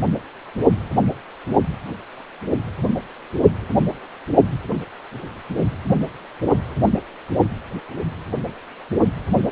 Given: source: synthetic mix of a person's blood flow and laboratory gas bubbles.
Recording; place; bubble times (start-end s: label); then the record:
Doppler ultrasound of blood flow; precordium
no bubbles
From the record:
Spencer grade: 0 (complete lack of bubble signals)